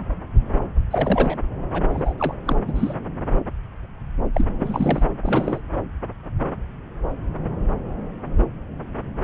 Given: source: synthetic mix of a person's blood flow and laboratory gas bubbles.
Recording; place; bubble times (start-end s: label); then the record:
Doppler ultrasound of blood flow; subclavian vein
0.91-1.39 s: bubbles
1.72-1.85 s: bubbles
1.93-2.14 s: bubbles
2.18-2.35 s: bubbles
2.45-2.57 s: bubbles
2.67-2.94 s: bubbles
4.34-4.46 s: bubbles
4.58-5.04 s: bubbles
5.23-5.61 s: bubbles
From the record:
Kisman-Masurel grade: 222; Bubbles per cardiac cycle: several, 3 to 8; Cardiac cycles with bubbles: 10 to 50%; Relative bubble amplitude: moderate (0.250 to 0.450); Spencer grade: 2 (many but less than half of the cardiac periods contain bubble signals, singularly or in groups); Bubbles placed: anywhere in the cardiac cycle